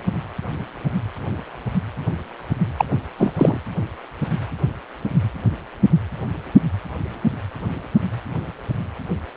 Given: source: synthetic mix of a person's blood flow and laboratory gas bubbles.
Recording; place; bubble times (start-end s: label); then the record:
Doppler ultrasound of blood flow; precordium
2.77-2.85 s: bubbles
2.91-2.97 s: bubbles
3.17-3.33 s: bubbles
3.36-3.58 s: bubbles
From the record:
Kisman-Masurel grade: 213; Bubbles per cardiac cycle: several, 3 to 8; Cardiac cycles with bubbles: 1 to 10%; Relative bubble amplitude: loud (0.450 to 0.775); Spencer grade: 1 (occasional bubble signal discernible with the cardiac motion signal, with majority of cardiac periods free of bubbles); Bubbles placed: anywhere in the cardiac cycle